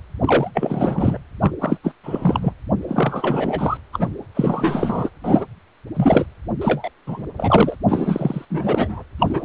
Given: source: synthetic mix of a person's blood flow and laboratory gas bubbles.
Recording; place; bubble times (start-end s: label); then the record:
Doppler ultrasound of blood flow; precordium
0.20-0.51 s: bubbles
0.54-1.19 s: bubbles
1.41-1.52 s: bubbles
1.61-1.78 s: bubbles
1.83-1.93 s: bubbles
2.03-2.53 s: bubbles
2.81-3.77 s: bubbles
3.92-4.10 s: bubbles
4.34-5.10 s: bubbles
5.23-5.45 s: bubbles
5.96-6.25 s: bubbles
6.61-6.89 s: bubbles
7.06-7.26 s: bubbles
7.37-7.76 s: bubbles
7.87-8.45 s: bubbles
8.50-9.03 s: bubbles
9.19-9.44 s: bubbles
From the record:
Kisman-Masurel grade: 343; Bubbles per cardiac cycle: rolling drumbeat, 9 or more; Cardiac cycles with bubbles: 100%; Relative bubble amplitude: loud (0.450 to 0.775); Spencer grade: 3 (all of the cardiac periods contain showers or single bubble signals, but not dominating or overriding the cardiac motion signals); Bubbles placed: anywhere in the cardiac cycle